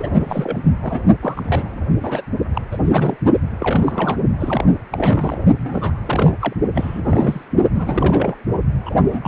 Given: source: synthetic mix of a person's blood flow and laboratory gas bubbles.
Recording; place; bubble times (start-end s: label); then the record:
Doppler ultrasound of blood flow; precordium
0.00-0.10 s: bubbles
0.20-0.62 s: bubbles
0.81-1.00 s: bubbles
1.22-1.82 s: bubbles
2.01-2.21 s: bubbles
2.54-2.62 s: bubbles
2.71-2.78 s: bubbles
2.84-3.18 s: bubbles
3.60-4.17 s: bubbles
4.40-4.65 s: bubbles
4.92-5.38 s: bubbles
5.57-5.97 s: bubbles
6.06-6.33 s: bubbles
6.40-6.54 s: bubbles
6.75-7.45 s: bubbles
7.74-8.35 s: bubbles
8.85-8.96 s: bubbles
9.01-9.28 s: bubbles
From the record:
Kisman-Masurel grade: 332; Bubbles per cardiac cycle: rolling drumbeat, 9 or more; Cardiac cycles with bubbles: 50 to 99%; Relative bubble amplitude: moderate (0.250 to 0.450); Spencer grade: 3 (all of the cardiac periods contain showers or single bubble signals, but not dominating or overriding the cardiac motion signals); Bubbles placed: only in the low amplitude regions of the cardiac cycle